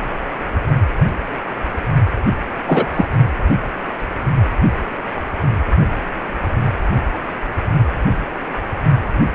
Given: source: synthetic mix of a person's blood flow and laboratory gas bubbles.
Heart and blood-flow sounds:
Doppler ultrasound of blood flow; precordium
2.66-2.91 s: bubbles
2.94-3.05 s: bubbles
From the record:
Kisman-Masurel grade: 213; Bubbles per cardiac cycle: several, 3 to 8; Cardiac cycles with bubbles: 1 to 10%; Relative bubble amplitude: loud (0.450 to 0.775); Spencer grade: 1 (occasional bubble signal discernible with the cardiac motion signal, with majority of cardiac periods free of bubbles); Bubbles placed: only in the low amplitude regions of the cardiac cycle

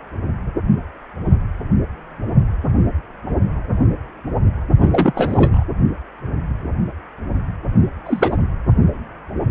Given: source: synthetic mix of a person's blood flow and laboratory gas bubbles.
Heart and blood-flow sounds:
Doppler ultrasound of blood flow; precordium
4.79-5.63 s: bubbles
8.06-8.36 s: bubbles
From the record:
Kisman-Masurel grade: 223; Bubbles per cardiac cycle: several, 3 to 8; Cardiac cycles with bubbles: 10 to 50%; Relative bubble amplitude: loud (0.450 to 0.775); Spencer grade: 2 (many but less than half of the cardiac periods contain bubble signals, singularly or in groups); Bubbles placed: only in the low amplitude regions of the cardiac cycle

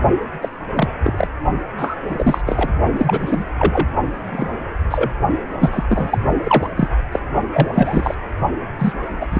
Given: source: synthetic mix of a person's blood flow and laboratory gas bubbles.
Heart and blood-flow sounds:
Doppler ultrasound of blood flow; precordium
0.41-0.49 s: bubbles
0.74-0.89 s: bubbles
1.04-1.28 s: bubbles
1.78-1.95 s: bubbles
2.07-2.42 s: bubbles
2.46-2.70 s: bubbles
2.96-3.44 s: bubbles
3.58-3.87 s: bubbles
4.06-4.54 s: bubbles
4.90-5.11 s: bubbles
5.60-5.85 s: bubbles
5.89-6.18 s: bubbles
6.44-6.70 s: bubbles
6.77-6.89 s: bubbles
7.12-7.20 s: bubbles
7.50-8.14 s: bubbles
8.79-8.93 s: bubbles
9.21-9.26 s: bubbles
9.30-9.40 s: bubbles
From the record:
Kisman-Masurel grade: 243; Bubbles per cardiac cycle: several, 3 to 8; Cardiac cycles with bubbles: 100%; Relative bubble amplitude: loud (0.450 to 0.775); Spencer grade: 3 (all of the cardiac periods contain showers or single bubble signals, but not dominating or overriding the cardiac motion signals); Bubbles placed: only in the low amplitude regions of the cardiac cycle

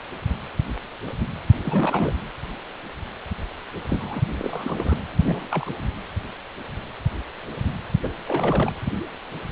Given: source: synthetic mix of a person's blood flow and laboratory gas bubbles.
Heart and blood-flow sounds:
Doppler ultrasound of blood flow; precordium
1.63-2.13 s: bubbles
3.88-4.21 s: bubbles
4.38-4.96 s: bubbles
5.24-5.70 s: bubbles
8.02-8.10 s: bubbles
8.24-8.72 s: bubbles
From the record:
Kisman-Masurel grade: 221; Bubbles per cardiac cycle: several, 3 to 8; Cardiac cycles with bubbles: 10 to 50%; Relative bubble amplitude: barely perceptible (0.100 to 0.250); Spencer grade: 2 (many but less than half of the cardiac periods contain bubble signals, singularly or in groups); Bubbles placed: anywhere in the cardiac cycle

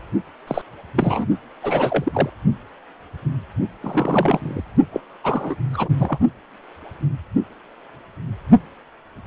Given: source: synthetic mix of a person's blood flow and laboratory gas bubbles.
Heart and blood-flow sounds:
Doppler ultrasound of blood flow; precordium
0.47-0.61 s: bubbles
0.97-1.26 s: bubbles
1.62-2.30 s: bubbles
3.82-4.64 s: bubbles
4.92-5.00 s: bubbles
5.24-5.55 s: bubbles
5.73-6.18 s: bubbles
From the record:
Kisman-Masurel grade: 222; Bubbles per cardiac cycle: several, 3 to 8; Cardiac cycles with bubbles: 10 to 50%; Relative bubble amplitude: moderate (0.250 to 0.450); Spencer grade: 2 (many but less than half of the cardiac periods contain bubble signals, singularly or in groups); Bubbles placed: only in the low amplitude regions of the cardiac cycle

